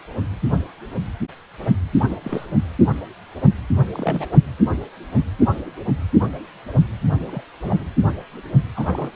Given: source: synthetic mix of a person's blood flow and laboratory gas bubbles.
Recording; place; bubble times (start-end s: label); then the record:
Doppler ultrasound of blood flow; precordium
2.09-2.17 s: bubbles
2.23-2.46 s: bubbles
2.51-2.56 s: bubbles
3.92-4.27 s: bubbles
4.33-4.38 s: bubbles
7.28-7.42 s: bubbles
7.63-7.84 s: bubbles
8.75-9.12 s: bubbles
From the record:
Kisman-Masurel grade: 221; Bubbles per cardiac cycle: several, 3 to 8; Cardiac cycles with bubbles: 10 to 50%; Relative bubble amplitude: barely perceptible (0.100 to 0.250); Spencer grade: 2 (many but less than half of the cardiac periods contain bubble signals, singularly or in groups); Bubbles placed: anywhere in the cardiac cycle